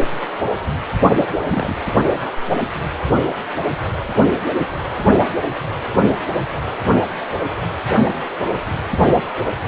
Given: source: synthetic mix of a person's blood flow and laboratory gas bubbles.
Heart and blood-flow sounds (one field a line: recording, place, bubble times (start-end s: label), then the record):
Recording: Doppler ultrasound of blood flow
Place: precordium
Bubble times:
1.14-1.26 s: bubbles
1.39-1.43 s: bubbles
1.47-1.77 s: bubbles
From the record:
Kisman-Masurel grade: 211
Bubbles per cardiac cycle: several, 3 to 8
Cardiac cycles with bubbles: 1 to 10%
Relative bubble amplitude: barely perceptible (0.100 to 0.250)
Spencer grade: 1 (occasional bubble signal discernible with the cardiac motion signal, with majority of cardiac periods free of bubbles)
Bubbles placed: only in the low amplitude regions of the cardiac cycle